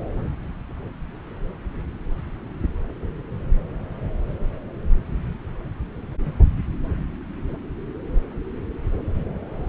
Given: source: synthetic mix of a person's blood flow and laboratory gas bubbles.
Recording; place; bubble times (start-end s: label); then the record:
Doppler ultrasound of blood flow; subclavian vein
no bubbles
From the record:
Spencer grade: 0 (complete lack of bubble signals)